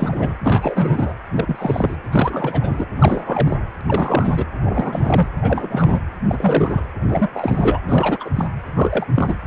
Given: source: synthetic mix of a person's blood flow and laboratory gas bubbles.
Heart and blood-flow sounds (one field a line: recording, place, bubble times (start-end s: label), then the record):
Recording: Doppler ultrasound of blood flow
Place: precordium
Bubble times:
0.00-0.36 s: bubbles
0.44-1.13 s: bubbles
1.33-1.96 s: bubbles
2.11-2.85 s: bubbles
2.95-3.58 s: bubbles
3.80-3.83 s: bubbles
3.86-4.45 s: bubbles
4.62-5.27 s: bubbles
5.42-6.00 s: bubbles
6.29-6.82 s: bubbles
7.00-7.29 s: bubbles
7.34-7.80 s: bubbles
7.89-8.29 s: bubbles
8.35-8.48 s: bubbles
8.75-9.06 s: bubbles
9.15-9.37 s: bubbles
From the record:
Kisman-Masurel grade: 342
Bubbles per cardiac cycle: rolling drumbeat, 9 or more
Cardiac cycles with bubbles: 100%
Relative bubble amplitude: moderate (0.250 to 0.450)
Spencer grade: 3 (all of the cardiac periods contain showers or single bubble signals, but not dominating or overriding the cardiac motion signals)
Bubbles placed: anywhere in the cardiac cycle